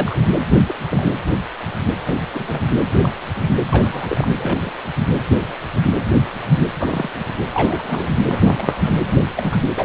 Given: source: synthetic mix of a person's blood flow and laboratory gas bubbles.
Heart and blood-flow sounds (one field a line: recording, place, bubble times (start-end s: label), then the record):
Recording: Doppler ultrasound of blood flow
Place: precordium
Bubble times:
0.00-0.20 s: bubbles
0.67-0.75 s: bubbles
0.89-1.12 s: bubbles
2.06-2.19 s: bubbles
2.34-2.62 s: bubbles
2.75-2.83 s: bubbles
2.89-3.11 s: bubbles
3.35-3.55 s: bubbles
3.71-4.27 s: bubbles
4.37-4.79 s: bubbles
6.79-7.08 s: bubbles
7.54-8.11 s: bubbles
8.28-8.96 s: bubbles
9.09-9.19 s: bubbles
9.33-9.60 s: bubbles
9.76-9.85 s: bubbles
From the record:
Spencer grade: 3 (all of the cardiac periods contain showers or single bubble signals, but not dominating or overriding the cardiac motion signals)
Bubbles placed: anywhere in the cardiac cycle